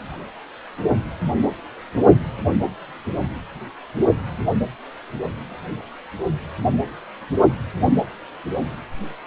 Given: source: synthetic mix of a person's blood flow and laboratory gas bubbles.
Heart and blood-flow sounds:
Doppler ultrasound of blood flow; precordium
no bubbles
From the record:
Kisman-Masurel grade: 000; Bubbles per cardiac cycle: 0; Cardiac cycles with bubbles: 0%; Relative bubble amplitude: no bubbles discernible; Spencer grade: 0 (complete lack of bubble signals)

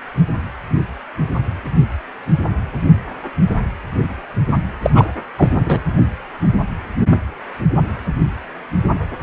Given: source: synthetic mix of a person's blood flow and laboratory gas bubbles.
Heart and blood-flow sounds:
Doppler ultrasound of blood flow; precordium
4.82-4.91 s: bubbles
4.95-5.05 s: bubbles
5.38-5.50 s: bubbles
5.65-5.83 s: bubbles
From the record:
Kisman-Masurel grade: 213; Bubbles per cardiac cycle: several, 3 to 8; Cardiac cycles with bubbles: 1 to 10%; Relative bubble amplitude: loud (0.450 to 0.775); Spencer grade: 1 (occasional bubble signal discernible with the cardiac motion signal, with majority of cardiac periods free of bubbles); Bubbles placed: anywhere in the cardiac cycle

